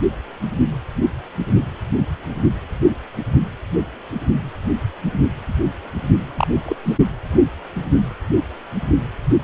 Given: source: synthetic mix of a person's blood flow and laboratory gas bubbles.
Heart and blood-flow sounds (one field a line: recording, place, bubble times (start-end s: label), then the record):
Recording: Doppler ultrasound of blood flow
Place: precordium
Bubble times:
6.35-6.47 s: bubbles
6.66-6.76 s: bubbles
6.84-6.97 s: bubbles
From the record:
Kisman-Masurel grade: 212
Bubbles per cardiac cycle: several, 3 to 8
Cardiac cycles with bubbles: 1 to 10%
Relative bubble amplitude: moderate (0.250 to 0.450)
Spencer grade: 1 (occasional bubble signal discernible with the cardiac motion signal, with majority of cardiac periods free of bubbles)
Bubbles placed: anywhere in the cardiac cycle